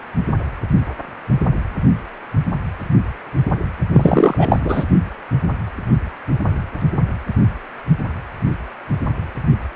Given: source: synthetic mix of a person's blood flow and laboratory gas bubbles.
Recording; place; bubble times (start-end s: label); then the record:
Doppler ultrasound of blood flow; precordium
3.94-4.59 s: bubbles
4.64-4.84 s: bubbles
From the record:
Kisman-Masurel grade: 213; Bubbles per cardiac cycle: several, 3 to 8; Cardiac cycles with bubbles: 1 to 10%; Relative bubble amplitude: loud (0.450 to 0.775); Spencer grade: 1 (occasional bubble signal discernible with the cardiac motion signal, with majority of cardiac periods free of bubbles); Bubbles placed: anywhere in the cardiac cycle